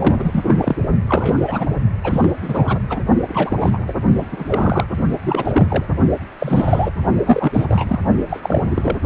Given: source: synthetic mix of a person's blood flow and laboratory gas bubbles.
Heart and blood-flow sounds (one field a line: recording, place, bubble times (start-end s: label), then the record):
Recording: Doppler ultrasound of blood flow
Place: precordium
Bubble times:
0.00-0.43 s: bubbles
0.48-0.55 s: bubbles
0.60-0.76 s: bubbles
1.07-1.66 s: bubbles
2.04-2.34 s: bubbles
2.42-2.79 s: bubbles
2.89-3.00 s: bubbles
3.28-3.85 s: bubbles
3.88-3.93 s: bubbles
4.17-4.26 s: bubbles
4.31-4.85 s: bubbles
5.21-5.85 s: bubbles
6.38-6.91 s: bubbles
7.25-7.99 s: bubbles
8.29-8.61 s: bubbles
8.70-8.98 s: bubbles
From the record:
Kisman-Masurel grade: 332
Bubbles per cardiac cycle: rolling drumbeat, 9 or more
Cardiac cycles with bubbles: 50 to 99%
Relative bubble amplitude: moderate (0.250 to 0.450)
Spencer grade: 3 (all of the cardiac periods contain showers or single bubble signals, but not dominating or overriding the cardiac motion signals)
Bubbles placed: only in the low amplitude regions of the cardiac cycle